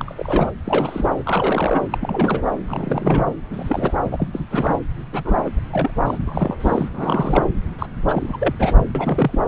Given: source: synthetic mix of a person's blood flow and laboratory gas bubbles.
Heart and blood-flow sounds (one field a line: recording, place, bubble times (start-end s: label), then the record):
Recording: Doppler ultrasound of blood flow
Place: subclavian vein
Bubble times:
0.00-0.51 s: bubbles
0.66-1.07 s: bubbles
1.17-1.79 s: bubbles
1.91-1.98 s: bubbles
2.01-2.42 s: bubbles
2.68-3.33 s: bubbles
3.50-3.94 s: bubbles
4.04-4.28 s: bubbles
4.34-4.45 s: bubbles
4.51-4.78 s: bubbles
5.13-5.22 s: bubbles
5.24-5.91 s: bubbles
6.05-6.19 s: bubbles
6.28-6.58 s: bubbles
6.60-6.89 s: bubbles
6.93-7.49 s: bubbles
7.79-7.87 s: bubbles
8.08-8.37 s: bubbles
8.39-8.55 s: bubbles
8.59-8.78 s: bubbles
8.95-9.41 s: bubbles
From the record:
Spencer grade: 3 (all of the cardiac periods contain showers or single bubble signals, but not dominating or overriding the cardiac motion signals)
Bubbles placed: anywhere in the cardiac cycle